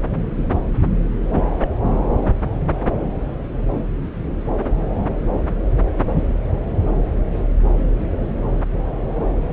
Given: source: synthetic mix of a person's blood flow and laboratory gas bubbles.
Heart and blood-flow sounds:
Doppler ultrasound of blood flow; subclavian vein
1.60-1.68 s: bubbles
From the record:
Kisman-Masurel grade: 111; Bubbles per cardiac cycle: 1 to 2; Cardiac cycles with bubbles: 1 to 10%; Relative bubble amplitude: barely perceptible (0.100 to 0.250); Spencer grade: 1 (occasional bubble signal discernible with the cardiac motion signal, with majority of cardiac periods free of bubbles); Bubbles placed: anywhere in the cardiac cycle

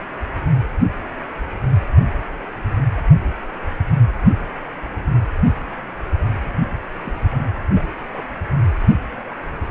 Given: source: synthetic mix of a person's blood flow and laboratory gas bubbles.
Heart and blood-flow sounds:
Doppler ultrasound of blood flow; precordium
7.04-7.12 s: bubbles
7.29-7.38 s: bubbles
7.73-7.83 s: bubbles
8.10-8.28 s: bubbles
From the record:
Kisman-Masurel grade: 211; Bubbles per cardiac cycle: several, 3 to 8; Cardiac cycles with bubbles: 1 to 10%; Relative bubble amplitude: barely perceptible (0.100 to 0.250); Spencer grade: 1 (occasional bubble signal discernible with the cardiac motion signal, with majority of cardiac periods free of bubbles); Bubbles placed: anywhere in the cardiac cycle

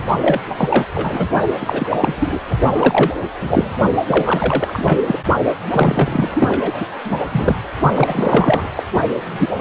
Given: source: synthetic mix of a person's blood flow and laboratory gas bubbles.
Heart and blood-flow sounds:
Doppler ultrasound of blood flow; precordium
0.00-0.02 s: bubbles
0.21-0.41 s: bubbles
0.47-0.84 s: bubbles
0.95-1.28 s: bubbles
1.60-2.40 s: bubbles
2.50-2.56 s: bubbles
2.73-3.12 s: bubbles
3.40-3.72 s: bubbles
4.06-4.98 s: bubbles
5.06-5.18 s: bubbles
5.70-6.29 s: bubbles
6.35-6.85 s: bubbles
7.04-7.17 s: bubbles
7.32-7.56 s: bubbles
7.94-8.67 s: bubbles
8.76-8.83 s: bubbles
9.25-9.57 s: bubbles
From the record:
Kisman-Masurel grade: 343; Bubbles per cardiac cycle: rolling drumbeat, 9 or more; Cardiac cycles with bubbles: 100%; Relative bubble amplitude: loud (0.450 to 0.775); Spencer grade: 3 (all of the cardiac periods contain showers or single bubble signals, but not dominating or overriding the cardiac motion signals); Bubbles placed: only in the low amplitude regions of the cardiac cycle

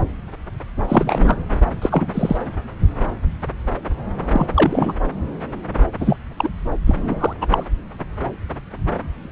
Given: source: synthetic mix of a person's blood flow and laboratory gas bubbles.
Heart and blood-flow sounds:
Doppler ultrasound of blood flow; subclavian vein
0.88-1.37 s: bubbles
1.81-2.37 s: bubbles
4.29-4.46 s: bubbles
4.55-4.93 s: bubbles
5.99-6.17 s: bubbles
6.37-6.50 s: bubbles
6.87-7.33 s: bubbles
7.41-7.46 s: bubbles
7.50-7.65 s: bubbles
From the record:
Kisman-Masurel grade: 223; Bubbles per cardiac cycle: several, 3 to 8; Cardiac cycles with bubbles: 10 to 50%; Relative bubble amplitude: loud (0.450 to 0.775); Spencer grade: 2 (many but less than half of the cardiac periods contain bubble signals, singularly or in groups); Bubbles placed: anywhere in the cardiac cycle

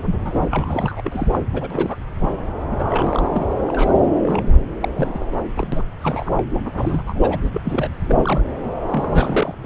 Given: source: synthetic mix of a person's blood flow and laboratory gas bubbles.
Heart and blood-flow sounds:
Doppler ultrasound of blood flow; subclavian vein
0.05-0.14 s: bubbles
0.25-0.46 s: bubbles
0.50-1.02 s: bubbles
1.04-1.27 s: bubbles
1.31-1.39 s: bubbles
1.54-2.04 s: bubbles
2.21-2.29 s: bubbles
2.71-2.75 s: bubbles
2.78-3.46 s: bubbles
3.68-4.07 s: bubbles
4.23-4.56 s: bubbles
4.80-5.26 s: bubbles
5.55-5.67 s: bubbles
5.72-5.81 s: bubbles
6.01-6.27 s: bubbles
6.37-6.43 s: bubbles
6.76-7.02 s: bubbles
7.07-7.39 s: bubbles
7.43-7.50 s: bubbles
7.53-7.61 s: bubbles
7.64-7.89 s: bubbles
8.01-8.41 s: bubbles
8.90-9.55 s: bubbles
From the record:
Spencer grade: 3 (all of the cardiac periods contain showers or single bubble signals, but not dominating or overriding the cardiac motion signals); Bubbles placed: anywhere in the cardiac cycle

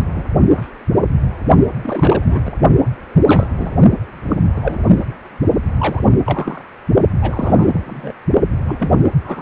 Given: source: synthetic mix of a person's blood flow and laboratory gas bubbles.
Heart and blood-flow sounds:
Doppler ultrasound of blood flow; precordium
0.00-0.03 s: bubbles
0.14-0.24 s: bubbles
0.38-0.69 s: bubbles
1.82-2.41 s: bubbles
2.45-2.52 s: bubbles
3.26-3.47 s: bubbles
3.57-3.76 s: bubbles
4.28-4.36 s: bubbles
4.55-5.05 s: bubbles
5.77-6.04 s: bubbles
6.15-6.21 s: bubbles
6.25-6.62 s: bubbles
7.21-7.80 s: bubbles
7.86-8.12 s: bubbles
8.67-9.00 s: bubbles
9.03-9.10 s: bubbles
9.24-9.42 s: bubbles
From the record:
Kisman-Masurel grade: 232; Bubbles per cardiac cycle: several, 3 to 8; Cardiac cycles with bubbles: 50 to 99%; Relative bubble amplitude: moderate (0.250 to 0.450); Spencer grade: 3 (all of the cardiac periods contain showers or single bubble signals, but not dominating or overriding the cardiac motion signals); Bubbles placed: only in the low amplitude regions of the cardiac cycle

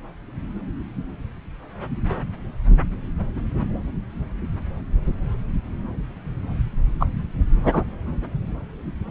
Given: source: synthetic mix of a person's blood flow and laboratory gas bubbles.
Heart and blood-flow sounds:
Doppler ultrasound of blood flow; subclavian vein
6.99-7.06 s: bubbles
7.63-7.82 s: bubbles
From the record:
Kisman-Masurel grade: 113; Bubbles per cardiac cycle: 1 to 2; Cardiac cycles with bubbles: 1 to 10%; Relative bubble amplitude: loud (0.450 to 0.775); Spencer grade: 1 (occasional bubble signal discernible with the cardiac motion signal, with majority of cardiac periods free of bubbles); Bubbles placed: anywhere in the cardiac cycle

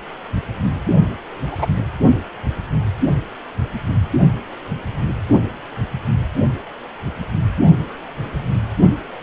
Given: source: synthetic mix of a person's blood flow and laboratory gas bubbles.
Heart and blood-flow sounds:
Doppler ultrasound of blood flow; precordium
1.51-1.66 s: bubbles
From the record:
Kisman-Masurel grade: 113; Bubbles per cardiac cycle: 1 to 2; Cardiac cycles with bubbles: 1 to 10%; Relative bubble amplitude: loud (0.450 to 0.775); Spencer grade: 1 (occasional bubble signal discernible with the cardiac motion signal, with majority of cardiac periods free of bubbles); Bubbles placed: only in the low amplitude regions of the cardiac cycle

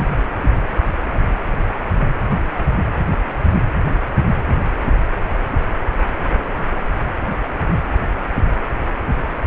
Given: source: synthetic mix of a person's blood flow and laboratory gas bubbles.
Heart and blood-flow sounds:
Doppler ultrasound of blood flow; precordium
0.00-0.07 s: bubbles
From the record:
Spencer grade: 1 (occasional bubble signal discernible with the cardiac motion signal, with majority of cardiac periods free of bubbles); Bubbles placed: anywhere in the cardiac cycle

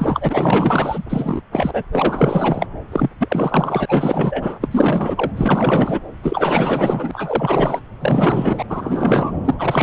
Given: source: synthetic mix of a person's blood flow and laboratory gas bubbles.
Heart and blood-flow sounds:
Doppler ultrasound of blood flow; subclavian vein
0.00-1.04 s: bubbles
1.09-1.42 s: bubbles
1.52-1.83 s: bubbles
1.92-2.67 s: bubbles
2.92-3.10 s: bubbles
3.20-3.85 s: bubbles
3.88-4.58 s: bubbles
4.61-5.32 s: bubbles
5.37-6.00 s: bubbles
6.23-7.81 s: bubbles
8.00-8.62 s: bubbles
8.69-9.31 s: bubbles
9.44-9.54 s: bubbles
9.58-9.83 s: bubbles
From the record:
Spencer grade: 4 (maximum detectable bubble signal sounding continuously throughout systole and diastole of every cardiac period, and overriding the amplitude of the normal cardiac signals); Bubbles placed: anywhere in the cardiac cycle

